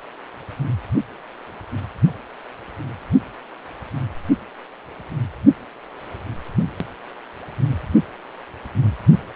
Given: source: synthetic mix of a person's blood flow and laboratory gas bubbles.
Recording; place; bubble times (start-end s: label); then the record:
Doppler ultrasound of blood flow; precordium
no bubbles
From the record:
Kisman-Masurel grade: 000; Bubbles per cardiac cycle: 0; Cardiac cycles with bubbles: 0%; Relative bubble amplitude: no bubbles discernible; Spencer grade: 0 (complete lack of bubble signals)